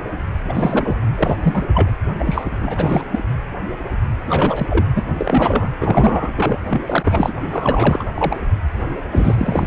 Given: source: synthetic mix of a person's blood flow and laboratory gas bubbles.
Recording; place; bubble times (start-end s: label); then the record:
Doppler ultrasound of blood flow; precordium
0.43-0.96 s: bubbles
1.15-1.68 s: bubbles
1.73-1.90 s: bubbles
2.19-3.05 s: bubbles
3.11-3.19 s: bubbles
4.26-4.85 s: bubbles
4.96-5.03 s: bubbles
5.17-5.70 s: bubbles
5.80-6.33 s: bubbles
6.36-6.58 s: bubbles
6.64-6.82 s: bubbles
6.86-7.33 s: bubbles
7.52-8.04 s: bubbles
8.14-8.39 s: bubbles
9.12-9.67 s: bubbles
From the record:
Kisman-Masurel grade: 333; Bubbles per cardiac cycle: rolling drumbeat, 9 or more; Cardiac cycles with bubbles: 50 to 99%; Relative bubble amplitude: loud (0.450 to 0.775); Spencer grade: 3 (all of the cardiac periods contain showers or single bubble signals, but not dominating or overriding the cardiac motion signals); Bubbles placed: anywhere in the cardiac cycle